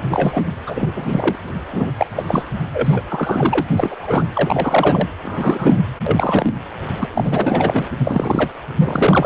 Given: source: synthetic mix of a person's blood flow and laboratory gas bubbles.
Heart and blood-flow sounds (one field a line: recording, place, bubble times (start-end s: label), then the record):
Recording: Doppler ultrasound of blood flow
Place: precordium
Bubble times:
0.09-0.41 s: bubbles
0.66-1.36 s: bubbles
1.71-1.91 s: bubbles
1.97-2.06 s: bubbles
2.16-2.26 s: bubbles
2.28-2.44 s: bubbles
2.73-3.01 s: bubbles
3.08-3.67 s: bubbles
3.77-4.25 s: bubbles
4.33-5.08 s: bubbles
5.23-5.83 s: bubbles
6.06-6.46 s: bubbles
6.98-7.09 s: bubbles
7.14-7.88 s: bubbles
7.98-8.53 s: bubbles
8.79-9.26 s: bubbles
From the record:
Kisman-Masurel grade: 343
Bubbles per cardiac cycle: rolling drumbeat, 9 or more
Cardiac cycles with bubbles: 100%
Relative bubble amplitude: loud (0.450 to 0.775)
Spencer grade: 3 (all of the cardiac periods contain showers or single bubble signals, but not dominating or overriding the cardiac motion signals)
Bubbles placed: anywhere in the cardiac cycle